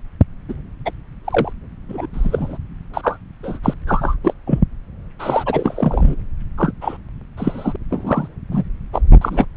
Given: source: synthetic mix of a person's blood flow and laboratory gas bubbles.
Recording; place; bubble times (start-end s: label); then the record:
Doppler ultrasound of blood flow; subclavian vein
0.48-0.54 s: bubbles
0.85-0.92 s: bubbles
1.25-1.53 s: bubbles
1.88-2.06 s: bubbles
2.13-2.58 s: bubbles
2.94-3.17 s: bubbles
3.43-3.59 s: bubbles
3.63-3.74 s: bubbles
3.87-4.17 s: bubbles
4.24-4.33 s: bubbles
4.46-4.60 s: bubbles
5.19-6.16 s: bubbles
6.58-6.72 s: bubbles
6.80-6.97 s: bubbles
7.37-7.76 s: bubbles
7.90-8.28 s: bubbles
8.50-8.64 s: bubbles
8.92-9.01 s: bubbles
9.11-9.17 s: bubbles
9.21-9.45 s: bubbles
From the record:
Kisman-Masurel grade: 243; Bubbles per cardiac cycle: several, 3 to 8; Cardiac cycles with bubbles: 100%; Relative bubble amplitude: loud (0.450 to 0.775); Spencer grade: 3 (all of the cardiac periods contain showers or single bubble signals, but not dominating or overriding the cardiac motion signals); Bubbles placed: anywhere in the cardiac cycle